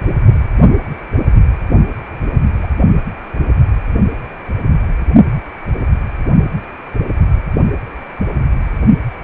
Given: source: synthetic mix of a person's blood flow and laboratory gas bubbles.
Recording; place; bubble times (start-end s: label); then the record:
Doppler ultrasound of blood flow; precordium
2.62-2.67 s: bubbles
From the record:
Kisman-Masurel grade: 111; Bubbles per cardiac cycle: 1 to 2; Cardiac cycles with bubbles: 1 to 10%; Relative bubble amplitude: barely perceptible (0.100 to 0.250); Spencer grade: 1 (occasional bubble signal discernible with the cardiac motion signal, with majority of cardiac periods free of bubbles); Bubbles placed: only in the low amplitude regions of the cardiac cycle